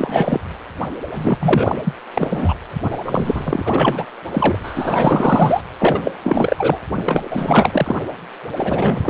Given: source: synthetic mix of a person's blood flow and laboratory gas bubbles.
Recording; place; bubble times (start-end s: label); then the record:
Doppler ultrasound of blood flow; precordium
0.00-0.40 s: bubbles
1.15-1.95 s: bubbles
2.13-2.54 s: bubbles
2.83-2.99 s: bubbles
3.04-4.06 s: bubbles
4.33-4.56 s: bubbles
4.62-5.61 s: bubbles
5.78-6.00 s: bubbles
6.04-6.12 s: bubbles
6.23-6.78 s: bubbles
6.96-7.96 s: bubbles
8.56-9.10 s: bubbles
From the record:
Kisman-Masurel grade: 444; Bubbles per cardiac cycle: continuous sound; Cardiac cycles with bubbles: 100%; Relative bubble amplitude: maximal (0.775 to 0.999); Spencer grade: 4 (maximum detectable bubble signal sounding continuously throughout systole and diastole of every cardiac period, and overriding the amplitude of the normal cardiac signals); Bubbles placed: anywhere in the cardiac cycle